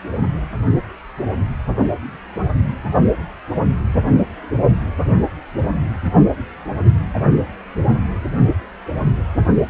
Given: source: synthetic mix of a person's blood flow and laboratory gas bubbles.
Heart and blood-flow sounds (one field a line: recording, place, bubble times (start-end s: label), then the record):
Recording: Doppler ultrasound of blood flow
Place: precordium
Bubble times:
no bubbles
From the record:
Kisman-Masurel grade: 000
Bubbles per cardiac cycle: 0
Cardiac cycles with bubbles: 0%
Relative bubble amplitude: no bubbles discernible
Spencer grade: 0 (complete lack of bubble signals)